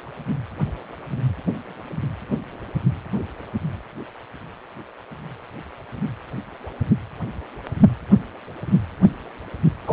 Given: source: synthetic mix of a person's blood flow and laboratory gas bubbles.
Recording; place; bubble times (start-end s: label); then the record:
Doppler ultrasound of blood flow; precordium
9.86-9.93 s: bubbles
From the record:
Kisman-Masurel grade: 213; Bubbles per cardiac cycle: several, 3 to 8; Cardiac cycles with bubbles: 1 to 10%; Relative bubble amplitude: loud (0.450 to 0.775); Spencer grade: 1 (occasional bubble signal discernible with the cardiac motion signal, with majority of cardiac periods free of bubbles); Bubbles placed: anywhere in the cardiac cycle